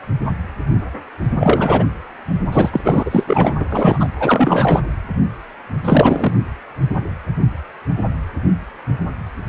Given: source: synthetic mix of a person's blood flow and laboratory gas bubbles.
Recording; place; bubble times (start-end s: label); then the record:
Doppler ultrasound of blood flow; precordium
1.39-1.87 s: bubbles
2.52-2.70 s: bubbles
2.73-2.81 s: bubbles
2.83-3.24 s: bubbles
3.27-3.54 s: bubbles
3.60-3.65 s: bubbles
3.69-4.08 s: bubbles
4.19-4.83 s: bubbles
5.84-6.37 s: bubbles
From the record:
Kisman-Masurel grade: 333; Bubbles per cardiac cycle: rolling drumbeat, 9 or more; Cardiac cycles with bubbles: 50 to 99%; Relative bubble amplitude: loud (0.450 to 0.775); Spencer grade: 3 (all of the cardiac periods contain showers or single bubble signals, but not dominating or overriding the cardiac motion signals); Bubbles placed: anywhere in the cardiac cycle